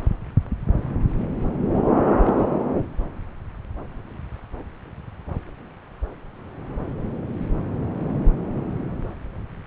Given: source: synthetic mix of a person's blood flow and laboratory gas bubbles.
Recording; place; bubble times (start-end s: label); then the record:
Doppler ultrasound of blood flow; subclavian vein
2.18-2.33 s: bubbles
2.36-2.45 s: bubbles
From the record:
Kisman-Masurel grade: 212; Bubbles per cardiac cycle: several, 3 to 8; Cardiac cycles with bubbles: 1 to 10%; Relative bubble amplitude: moderate (0.250 to 0.450); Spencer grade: 1 (occasional bubble signal discernible with the cardiac motion signal, with majority of cardiac periods free of bubbles); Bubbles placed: anywhere in the cardiac cycle